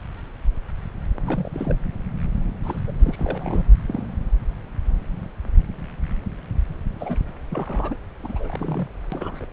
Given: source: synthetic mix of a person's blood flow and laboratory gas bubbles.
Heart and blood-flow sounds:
Doppler ultrasound of blood flow; subclavian vein
1.21-1.75 s: bubbles
2.63-2.79 s: bubbles
2.88-2.91 s: bubbles
2.99-3.64 s: bubbles
3.87-4.07 s: bubbles
6.99-7.19 s: bubbles
7.50-7.96 s: bubbles
8.24-8.88 s: bubbles
9.12-9.45 s: bubbles
From the record:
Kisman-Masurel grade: 221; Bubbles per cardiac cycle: several, 3 to 8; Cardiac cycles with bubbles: 10 to 50%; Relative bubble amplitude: barely perceptible (0.100 to 0.250); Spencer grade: 2 (many but less than half of the cardiac periods contain bubble signals, singularly or in groups); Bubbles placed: anywhere in the cardiac cycle

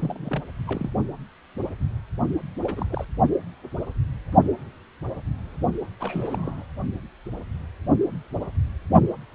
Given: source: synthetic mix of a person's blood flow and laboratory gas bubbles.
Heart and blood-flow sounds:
Doppler ultrasound of blood flow; precordium
0.00-0.43 s: bubbles
0.67-0.90 s: bubbles
2.62-2.86 s: bubbles
2.89-3.05 s: bubbles
6.00-6.65 s: bubbles
From the record:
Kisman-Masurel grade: 221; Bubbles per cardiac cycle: several, 3 to 8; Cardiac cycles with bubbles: 10 to 50%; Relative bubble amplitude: barely perceptible (0.100 to 0.250); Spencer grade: 2 (many but less than half of the cardiac periods contain bubble signals, singularly or in groups); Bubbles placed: only in the low amplitude regions of the cardiac cycle

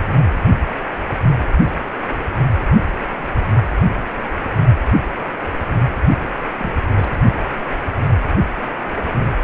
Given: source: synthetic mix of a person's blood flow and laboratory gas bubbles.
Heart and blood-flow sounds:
Doppler ultrasound of blood flow; precordium
6.58-6.71 s: bubbles
6.93-7.08 s: bubbles
From the record:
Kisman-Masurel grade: 221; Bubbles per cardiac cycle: several, 3 to 8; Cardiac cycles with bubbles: 10 to 50%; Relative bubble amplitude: barely perceptible (0.100 to 0.250); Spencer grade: 2 (many but less than half of the cardiac periods contain bubble signals, singularly or in groups); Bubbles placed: anywhere in the cardiac cycle

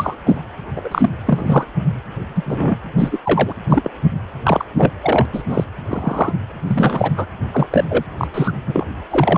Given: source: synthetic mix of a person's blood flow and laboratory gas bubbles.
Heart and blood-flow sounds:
Doppler ultrasound of blood flow; precordium
0.00-0.17 s: bubbles
0.26-0.41 s: bubbles
0.76-1.10 s: bubbles
1.25-1.65 s: bubbles
2.35-2.43 s: bubbles
2.46-2.77 s: bubbles
2.97-3.19 s: bubbles
3.23-3.54 s: bubbles
3.70-3.90 s: bubbles
4.43-4.64 s: bubbles
4.76-4.92 s: bubbles
5.02-5.27 s: bubbles
5.32-5.43 s: bubbles
5.48-5.64 s: bubbles
5.88-6.34 s: bubbles
6.67-7.11 s: bubbles
7.17-7.26 s: bubbles
7.53-7.67 s: bubbles
7.71-7.84 s: bubbles
7.89-8.04 s: bubbles
8.17-8.28 s: bubbles
8.34-8.51 s: bubbles
8.66-8.87 s: bubbles
9.10-9.38 s: bubbles
From the record:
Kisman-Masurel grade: 243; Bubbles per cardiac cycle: several, 3 to 8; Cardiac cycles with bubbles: 100%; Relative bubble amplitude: loud (0.450 to 0.775); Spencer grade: 3 (all of the cardiac periods contain showers or single bubble signals, but not dominating or overriding the cardiac motion signals); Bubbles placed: anywhere in the cardiac cycle

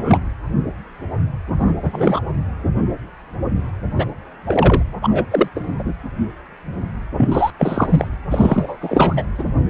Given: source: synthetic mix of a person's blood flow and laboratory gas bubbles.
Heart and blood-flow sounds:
Doppler ultrasound of blood flow; precordium
0.00-0.18 s: bubbles
1.58-1.73 s: bubbles
1.82-2.20 s: bubbles
3.97-4.08 s: bubbles
4.45-4.83 s: bubbles
5.02-5.25 s: bubbles
5.31-5.48 s: bubbles
5.54-5.83 s: bubbles
7.17-7.50 s: bubbles
7.58-8.07 s: bubbles
8.29-8.77 s: bubbles
8.80-9.26 s: bubbles
9.38-9.45 s: bubbles
From the record:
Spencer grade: 3 (all of the cardiac periods contain showers or single bubble signals, but not dominating or overriding the cardiac motion signals); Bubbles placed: anywhere in the cardiac cycle

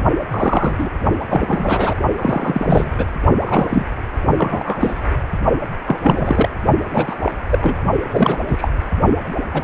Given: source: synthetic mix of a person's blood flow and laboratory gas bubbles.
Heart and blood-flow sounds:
Doppler ultrasound of blood flow; precordium
0.30-0.90 s: bubbles
1.20-1.25 s: bubbles
1.29-1.95 s: bubbles
2.16-2.92 s: bubbles
2.98-3.05 s: bubbles
3.40-3.85 s: bubbles
4.37-5.03 s: bubbles
5.85-6.00 s: bubbles
6.03-6.49 s: bubbles
6.90-7.32 s: bubbles
7.50-7.81 s: bubbles
8.10-8.37 s: bubbles
8.46-8.69 s: bubbles
9.53-9.64 s: bubbles
From the record:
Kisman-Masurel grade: 243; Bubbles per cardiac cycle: several, 3 to 8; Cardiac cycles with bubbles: 100%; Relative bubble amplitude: loud (0.450 to 0.775); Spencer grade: 3 (all of the cardiac periods contain showers or single bubble signals, but not dominating or overriding the cardiac motion signals); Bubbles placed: only in the low amplitude regions of the cardiac cycle

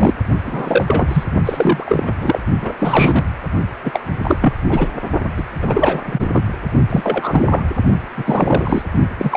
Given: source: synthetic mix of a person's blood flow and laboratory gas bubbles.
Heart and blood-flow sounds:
Doppler ultrasound of blood flow; precordium
0.00-0.15 s: bubbles
0.44-1.23 s: bubbles
1.45-2.40 s: bubbles
2.61-2.74 s: bubbles
2.79-3.25 s: bubbles
3.83-4.00 s: bubbles
4.23-4.37 s: bubbles
4.41-4.54 s: bubbles
4.69-4.88 s: bubbles
5.37-5.43 s: bubbles
5.62-6.03 s: bubbles
6.05-6.29 s: bubbles
6.34-6.43 s: bubbles
6.89-7.63 s: bubbles
8.18-8.82 s: bubbles
9.18-9.37 s: bubbles
From the record:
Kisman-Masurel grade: 343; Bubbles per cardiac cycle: rolling drumbeat, 9 or more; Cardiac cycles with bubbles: 100%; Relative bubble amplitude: loud (0.450 to 0.775); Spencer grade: 3 (all of the cardiac periods contain showers or single bubble signals, but not dominating or overriding the cardiac motion signals); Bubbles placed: only in the low amplitude regions of the cardiac cycle

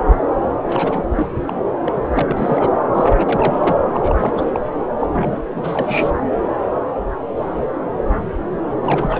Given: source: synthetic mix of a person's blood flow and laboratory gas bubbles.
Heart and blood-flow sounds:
Doppler ultrasound of blood flow; subclavian vein
0.65-1.04 s: bubbles
1.15-1.27 s: bubbles
1.47-1.54 s: bubbles
1.85-2.00 s: bubbles
2.14-2.69 s: bubbles
2.94-3.09 s: bubbles
3.17-3.78 s: bubbles
3.93-4.47 s: bubbles
4.54-4.60 s: bubbles
5.00-5.07 s: bubbles
5.12-6.11 s: bubbles
8.83-9.20 s: bubbles
From the record:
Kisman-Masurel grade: 332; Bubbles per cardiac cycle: rolling drumbeat, 9 or more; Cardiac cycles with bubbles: 50 to 99%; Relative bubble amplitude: moderate (0.250 to 0.450); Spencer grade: 3 (all of the cardiac periods contain showers or single bubble signals, but not dominating or overriding the cardiac motion signals); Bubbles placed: anywhere in the cardiac cycle

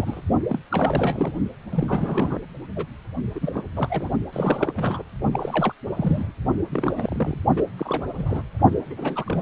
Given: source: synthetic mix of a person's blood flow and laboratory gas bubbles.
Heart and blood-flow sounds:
Doppler ultrasound of blood flow; precordium
0.00-0.24 s: bubbles
0.48-0.60 s: bubbles
0.70-1.32 s: bubbles
1.71-2.40 s: bubbles
2.75-2.85 s: bubbles
3.34-3.64 s: bubbles
3.75-4.08 s: bubbles
4.33-4.72 s: bubbles
4.76-5.03 s: bubbles
5.33-5.74 s: bubbles
5.97-6.32 s: bubbles
6.72-7.42 s: bubbles
7.57-7.65 s: bubbles
7.77-8.05 s: bubbles
8.18-8.43 s: bubbles
8.90-9.42 s: bubbles
From the record:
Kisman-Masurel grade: 342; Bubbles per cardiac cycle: rolling drumbeat, 9 or more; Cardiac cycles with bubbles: 100%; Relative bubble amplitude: moderate (0.250 to 0.450); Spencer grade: 3 (all of the cardiac periods contain showers or single bubble signals, but not dominating or overriding the cardiac motion signals); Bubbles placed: only in the low amplitude regions of the cardiac cycle

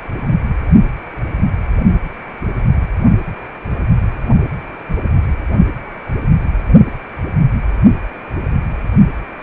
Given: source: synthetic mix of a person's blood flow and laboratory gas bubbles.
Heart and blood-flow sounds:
Doppler ultrasound of blood flow; precordium
no bubbles
From the record:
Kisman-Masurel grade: 000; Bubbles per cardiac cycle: 0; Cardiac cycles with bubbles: 0%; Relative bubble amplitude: no bubbles discernible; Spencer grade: 0 (complete lack of bubble signals)

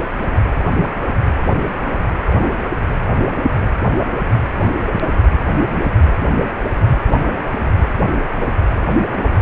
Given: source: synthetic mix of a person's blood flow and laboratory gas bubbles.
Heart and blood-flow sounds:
Doppler ultrasound of blood flow; precordium
2.27-2.48 s: bubbles
From the record:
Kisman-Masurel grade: 111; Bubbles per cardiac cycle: 1 to 2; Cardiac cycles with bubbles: 1 to 10%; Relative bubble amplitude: barely perceptible (0.100 to 0.250); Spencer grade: 1 (occasional bubble signal discernible with the cardiac motion signal, with majority of cardiac periods free of bubbles); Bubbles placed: anywhere in the cardiac cycle

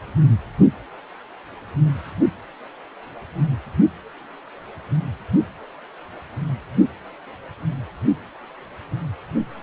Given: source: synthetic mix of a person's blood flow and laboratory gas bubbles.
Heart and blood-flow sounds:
Doppler ultrasound of blood flow; precordium
no bubbles
From the record:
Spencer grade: 0 (complete lack of bubble signals)

